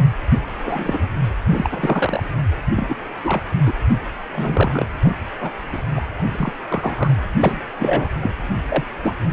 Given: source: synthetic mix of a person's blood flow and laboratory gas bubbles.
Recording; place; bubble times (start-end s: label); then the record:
Doppler ultrasound of blood flow; precordium
0.47-1.08 s: bubbles
1.50-2.23 s: bubbles
2.75-2.96 s: bubbles
3.23-3.42 s: bubbles
3.66-3.72 s: bubbles
4.33-4.85 s: bubbles
5.02-5.16 s: bubbles
5.40-5.52 s: bubbles
5.73-5.82 s: bubbles
5.96-6.01 s: bubbles
6.29-6.51 s: bubbles
6.68-7.14 s: bubbles
7.40-7.61 s: bubbles
7.79-8.10 s: bubbles
8.22-8.31 s: bubbles
8.69-8.85 s: bubbles
9.03-9.15 s: bubbles
From the record:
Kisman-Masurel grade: 242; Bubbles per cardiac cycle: several, 3 to 8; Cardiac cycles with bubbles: 100%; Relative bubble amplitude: moderate (0.250 to 0.450); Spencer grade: 3 (all of the cardiac periods contain showers or single bubble signals, but not dominating or overriding the cardiac motion signals); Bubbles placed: anywhere in the cardiac cycle